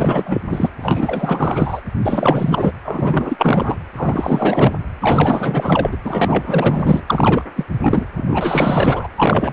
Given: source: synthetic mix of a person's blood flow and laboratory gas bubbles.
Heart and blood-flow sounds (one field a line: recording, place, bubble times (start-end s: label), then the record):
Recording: Doppler ultrasound of blood flow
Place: precordium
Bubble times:
0.00-0.41 s: bubbles
0.49-0.70 s: bubbles
0.81-1.81 s: bubbles
2.02-2.73 s: bubbles
2.85-3.75 s: bubbles
3.96-4.76 s: bubbles
5.00-5.97 s: bubbles
6.04-7.04 s: bubbles
7.07-7.45 s: bubbles
7.56-7.65 s: bubbles
7.79-8.05 s: bubbles
8.16-9.07 s: bubbles
9.17-9.53 s: bubbles
From the record:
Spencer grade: 4 (maximum detectable bubble signal sounding continuously throughout systole and diastole of every cardiac period, and overriding the amplitude of the normal cardiac signals)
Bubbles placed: anywhere in the cardiac cycle